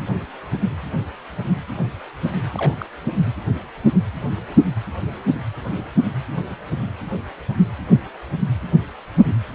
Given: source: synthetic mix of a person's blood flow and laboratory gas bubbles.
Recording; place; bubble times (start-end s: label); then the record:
Doppler ultrasound of blood flow; precordium
2.55-2.75 s: bubbles
2.78-2.86 s: bubbles
3.13-3.17 s: bubbles
From the record:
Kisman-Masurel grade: 221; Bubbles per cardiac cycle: several, 3 to 8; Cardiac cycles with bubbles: 10 to 50%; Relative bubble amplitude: barely perceptible (0.100 to 0.250); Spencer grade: 2 (many but less than half of the cardiac periods contain bubble signals, singularly or in groups); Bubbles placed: anywhere in the cardiac cycle